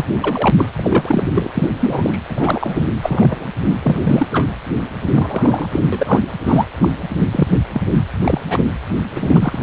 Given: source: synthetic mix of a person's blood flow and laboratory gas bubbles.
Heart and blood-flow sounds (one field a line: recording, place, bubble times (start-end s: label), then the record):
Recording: Doppler ultrasound of blood flow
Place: precordium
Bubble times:
0.00-0.05 s: bubbles
0.21-0.50 s: bubbles
0.57-0.72 s: bubbles
0.75-1.28 s: bubbles
1.34-1.51 s: bubbles
1.54-1.69 s: bubbles
1.80-2.18 s: bubbles
2.29-2.86 s: bubbles
3.02-3.49 s: bubbles
3.63-3.75 s: bubbles
3.83-4.28 s: bubbles
4.32-4.47 s: bubbles
5.14-5.66 s: bubbles
5.71-5.79 s: bubbles
5.92-6.20 s: bubbles
6.46-6.65 s: bubbles
6.82-6.88 s: bubbles
7.31-7.59 s: bubbles
7.74-7.81 s: bubbles
7.95-8.04 s: bubbles
8.22-8.41 s: bubbles
8.46-8.59 s: bubbles
9.15-9.63 s: bubbles
From the record:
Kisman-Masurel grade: 243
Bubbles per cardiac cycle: several, 3 to 8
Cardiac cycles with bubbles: 100%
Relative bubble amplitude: loud (0.450 to 0.775)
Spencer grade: 3 (all of the cardiac periods contain showers or single bubble signals, but not dominating or overriding the cardiac motion signals)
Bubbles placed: anywhere in the cardiac cycle